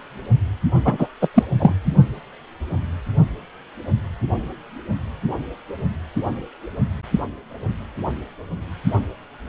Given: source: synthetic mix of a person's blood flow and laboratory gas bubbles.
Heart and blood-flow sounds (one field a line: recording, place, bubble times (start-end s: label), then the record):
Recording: Doppler ultrasound of blood flow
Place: precordium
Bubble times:
0.84-1.07 s: bubbles
1.21-1.28 s: bubbles
1.34-1.43 s: bubbles
1.58-1.74 s: bubbles
From the record:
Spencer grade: 1 (occasional bubble signal discernible with the cardiac motion signal, with majority of cardiac periods free of bubbles)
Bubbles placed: anywhere in the cardiac cycle